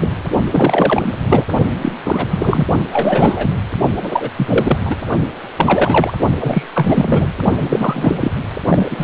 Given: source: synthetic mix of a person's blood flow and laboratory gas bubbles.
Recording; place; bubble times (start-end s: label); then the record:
Doppler ultrasound of blood flow; precordium
0.01-0.08 s: bubbles
0.51-1.11 s: bubbles
1.27-1.45 s: bubbles
1.81-1.92 s: bubbles
2.04-2.67 s: bubbles
2.90-3.52 s: bubbles
3.95-4.30 s: bubbles
4.37-4.79 s: bubbles
4.86-4.96 s: bubbles
5.56-6.12 s: bubbles
6.40-6.63 s: bubbles
6.74-7.34 s: bubbles
7.57-8.18 s: bubbles
8.21-8.31 s: bubbles
8.68-9.04 s: bubbles
From the record:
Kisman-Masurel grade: 333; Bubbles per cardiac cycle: rolling drumbeat, 9 or more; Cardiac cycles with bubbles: 50 to 99%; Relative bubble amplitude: loud (0.450 to 0.775); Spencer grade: 3 (all of the cardiac periods contain showers or single bubble signals, but not dominating or overriding the cardiac motion signals); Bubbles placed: only in the low amplitude regions of the cardiac cycle